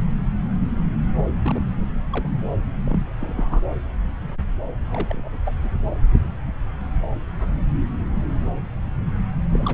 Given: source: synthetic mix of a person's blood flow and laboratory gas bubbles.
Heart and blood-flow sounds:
Doppler ultrasound of blood flow; subclavian vein
1.42-1.62 s: bubbles
2.12-2.29 s: bubbles
2.85-2.99 s: bubbles
3.19-3.61 s: bubbles
4.82-4.87 s: bubbles
4.90-5.38 s: bubbles
5.45-5.59 s: bubbles
5.64-5.69 s: bubbles
9.53-9.74 s: bubbles
From the record:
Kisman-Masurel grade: 221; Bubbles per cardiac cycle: several, 3 to 8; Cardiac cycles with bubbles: 10 to 50%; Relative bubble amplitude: barely perceptible (0.100 to 0.250); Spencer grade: 2 (many but less than half of the cardiac periods contain bubble signals, singularly or in groups); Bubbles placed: anywhere in the cardiac cycle

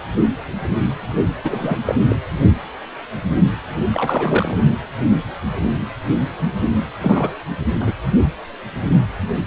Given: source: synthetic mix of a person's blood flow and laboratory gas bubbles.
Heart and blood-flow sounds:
Doppler ultrasound of blood flow; precordium
1.43-1.78 s: bubbles
1.85-1.95 s: bubbles
2.09-2.17 s: bubbles
3.93-4.56 s: bubbles
7.00-7.30 s: bubbles
7.79-7.95 s: bubbles
From the record:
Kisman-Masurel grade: 223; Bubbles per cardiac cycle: several, 3 to 8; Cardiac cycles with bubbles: 10 to 50%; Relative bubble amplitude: loud (0.450 to 0.775); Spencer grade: 2 (many but less than half of the cardiac periods contain bubble signals, singularly or in groups); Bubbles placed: anywhere in the cardiac cycle

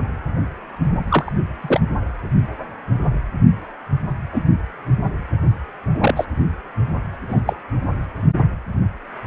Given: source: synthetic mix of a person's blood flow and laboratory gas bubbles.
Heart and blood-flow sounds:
Doppler ultrasound of blood flow; precordium
1.08-1.33 s: bubbles
1.62-1.81 s: bubbles
4.32-4.42 s: bubbles
5.99-6.24 s: bubbles
7.28-7.40 s: bubbles
7.46-7.53 s: bubbles
From the record:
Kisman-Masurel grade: 123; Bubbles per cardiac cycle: 1 to 2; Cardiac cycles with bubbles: 10 to 50%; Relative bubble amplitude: loud (0.450 to 0.775); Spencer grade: 2 (many but less than half of the cardiac periods contain bubble signals, singularly or in groups); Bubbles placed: only in the low amplitude regions of the cardiac cycle

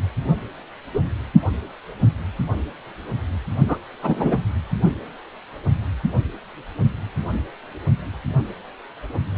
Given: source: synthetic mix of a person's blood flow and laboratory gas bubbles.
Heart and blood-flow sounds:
Doppler ultrasound of blood flow; precordium
0.94-1.00 s: bubbles
3.67-3.77 s: bubbles
4.03-4.38 s: bubbles
From the record:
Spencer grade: 2 (many but less than half of the cardiac periods contain bubble signals, singularly or in groups); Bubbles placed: only in the low amplitude regions of the cardiac cycle

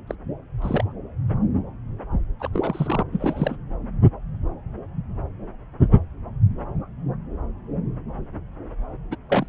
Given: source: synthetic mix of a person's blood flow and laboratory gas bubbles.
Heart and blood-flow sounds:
Doppler ultrasound of blood flow; subclavian vein
0.07-0.15 s: bubbles
0.61-0.84 s: bubbles
2.40-2.48 s: bubbles
2.53-3.03 s: bubbles
3.12-3.56 s: bubbles
9.11-9.17 s: bubbles
9.29-9.46 s: bubbles
From the record:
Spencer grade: 2 (many but less than half of the cardiac periods contain bubble signals, singularly or in groups); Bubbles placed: anywhere in the cardiac cycle

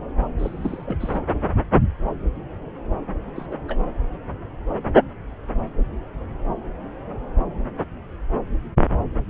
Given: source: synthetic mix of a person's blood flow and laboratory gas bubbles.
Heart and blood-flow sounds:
Doppler ultrasound of blood flow; subclavian vein
0.39-1.19 s: bubbles
3.35-3.46 s: bubbles
3.50-3.55 s: bubbles
3.67-3.80 s: bubbles
From the record:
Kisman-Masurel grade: 221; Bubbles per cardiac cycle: several, 3 to 8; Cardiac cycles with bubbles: 10 to 50%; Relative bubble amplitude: barely perceptible (0.100 to 0.250); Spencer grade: 2 (many but less than half of the cardiac periods contain bubble signals, singularly or in groups); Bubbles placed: anywhere in the cardiac cycle

